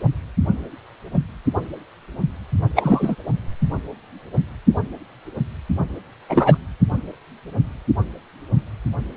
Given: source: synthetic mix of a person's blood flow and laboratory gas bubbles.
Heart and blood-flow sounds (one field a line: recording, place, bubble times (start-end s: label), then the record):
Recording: Doppler ultrasound of blood flow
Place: precordium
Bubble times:
2.76-3.15 s: bubbles
6.29-6.58 s: bubbles
From the record:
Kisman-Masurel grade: 223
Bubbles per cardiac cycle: several, 3 to 8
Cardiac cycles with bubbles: 10 to 50%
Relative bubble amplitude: loud (0.450 to 0.775)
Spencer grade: 2 (many but less than half of the cardiac periods contain bubble signals, singularly or in groups)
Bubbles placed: anywhere in the cardiac cycle